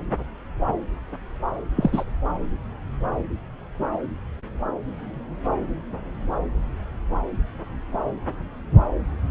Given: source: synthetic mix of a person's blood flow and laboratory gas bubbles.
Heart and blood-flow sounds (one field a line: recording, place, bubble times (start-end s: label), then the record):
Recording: Doppler ultrasound of blood flow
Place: subclavian vein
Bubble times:
1.76-2.04 s: bubbles
From the record:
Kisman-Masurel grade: 212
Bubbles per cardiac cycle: several, 3 to 8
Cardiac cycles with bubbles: 1 to 10%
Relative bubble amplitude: moderate (0.250 to 0.450)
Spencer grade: 1 (occasional bubble signal discernible with the cardiac motion signal, with majority of cardiac periods free of bubbles)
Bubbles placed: anywhere in the cardiac cycle